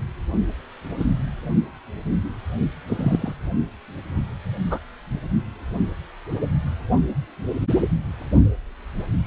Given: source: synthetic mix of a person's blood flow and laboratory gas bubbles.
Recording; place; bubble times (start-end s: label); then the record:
Doppler ultrasound of blood flow; precordium
0.99-1.04 s: bubbles
2.88-3.33 s: bubbles
4.71-4.79 s: bubbles
9.23-9.26 s: bubbles
From the record:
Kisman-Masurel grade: 122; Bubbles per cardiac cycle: 1 to 2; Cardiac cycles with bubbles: 10 to 50%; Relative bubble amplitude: moderate (0.250 to 0.450); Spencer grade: 2 (many but less than half of the cardiac periods contain bubble signals, singularly or in groups); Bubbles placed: anywhere in the cardiac cycle